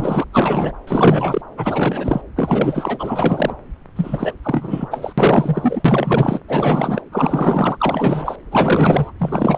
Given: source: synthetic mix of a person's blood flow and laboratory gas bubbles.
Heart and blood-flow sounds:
Doppler ultrasound of blood flow; subclavian vein
0.00-0.24 s: bubbles
0.33-0.72 s: bubbles
0.87-1.42 s: bubbles
1.57-2.21 s: bubbles
2.36-3.56 s: bubbles
3.95-4.33 s: bubbles
4.42-5.13 s: bubbles
5.17-6.40 s: bubbles
6.48-7.02 s: bubbles
7.12-7.76 s: bubbles
7.79-8.36 s: bubbles
8.51-9.12 s: bubbles
9.18-9.58 s: bubbles
From the record:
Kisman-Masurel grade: 444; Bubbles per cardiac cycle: continuous sound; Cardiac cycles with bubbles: 100%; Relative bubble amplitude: maximal (0.775 to 0.999); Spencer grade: 4 (maximum detectable bubble signal sounding continuously throughout systole and diastole of every cardiac period, and overriding the amplitude of the normal cardiac signals); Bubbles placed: anywhere in the cardiac cycle

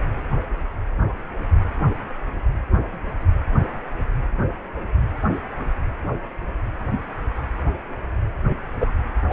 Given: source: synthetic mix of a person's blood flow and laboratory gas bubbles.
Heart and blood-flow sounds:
Doppler ultrasound of blood flow; precordium
8.80-8.91 s: bubbles
9.29-9.33 s: bubbles
From the record:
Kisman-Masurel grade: 112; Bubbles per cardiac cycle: 1 to 2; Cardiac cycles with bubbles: 1 to 10%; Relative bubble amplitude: moderate (0.250 to 0.450); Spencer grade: 1 (occasional bubble signal discernible with the cardiac motion signal, with majority of cardiac periods free of bubbles); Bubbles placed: anywhere in the cardiac cycle

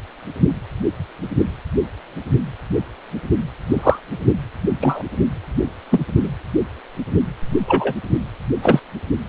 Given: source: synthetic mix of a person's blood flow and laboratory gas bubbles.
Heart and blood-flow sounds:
Doppler ultrasound of blood flow; precordium
3.69-4.00 s: bubbles
4.80-5.02 s: bubbles
5.91-6.04 s: bubbles
6.20-6.28 s: bubbles
7.67-7.94 s: bubbles
8.62-8.79 s: bubbles
From the record:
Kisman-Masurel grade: 123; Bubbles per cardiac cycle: 1 to 2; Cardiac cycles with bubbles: 10 to 50%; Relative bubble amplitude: loud (0.450 to 0.775); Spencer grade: 2 (many but less than half of the cardiac periods contain bubble signals, singularly or in groups); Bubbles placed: anywhere in the cardiac cycle

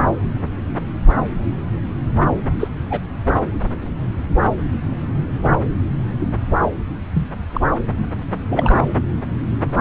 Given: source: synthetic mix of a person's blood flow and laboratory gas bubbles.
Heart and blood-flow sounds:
Doppler ultrasound of blood flow; subclavian vein
2.60-2.68 s: bubbles
2.90-3.00 s: bubbles
7.15-7.29 s: bubbles
7.54-7.61 s: bubbles
8.48-8.82 s: bubbles
From the record:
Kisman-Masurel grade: 122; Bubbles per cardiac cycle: 1 to 2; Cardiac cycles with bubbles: 10 to 50%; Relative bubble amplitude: moderate (0.250 to 0.450); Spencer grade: 2 (many but less than half of the cardiac periods contain bubble signals, singularly or in groups); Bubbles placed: anywhere in the cardiac cycle

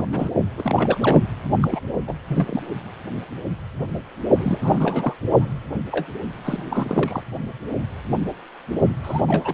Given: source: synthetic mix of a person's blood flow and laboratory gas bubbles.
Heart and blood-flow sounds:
Doppler ultrasound of blood flow; precordium
0.00-0.06 s: bubbles
0.11-0.30 s: bubbles
0.57-1.22 s: bubbles
1.61-1.80 s: bubbles
2.08-2.13 s: bubbles
2.27-2.62 s: bubbles
4.35-5.13 s: bubbles
5.34-5.58 s: bubbles
5.92-6.07 s: bubbles
6.45-6.63 s: bubbles
6.71-7.23 s: bubbles
9.04-9.21 s: bubbles
9.28-9.54 s: bubbles
From the record:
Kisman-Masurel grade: 332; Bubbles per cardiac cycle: rolling drumbeat, 9 or more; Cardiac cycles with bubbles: 50 to 99%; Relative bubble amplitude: moderate (0.250 to 0.450); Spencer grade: 3 (all of the cardiac periods contain showers or single bubble signals, but not dominating or overriding the cardiac motion signals); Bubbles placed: only in the low amplitude regions of the cardiac cycle

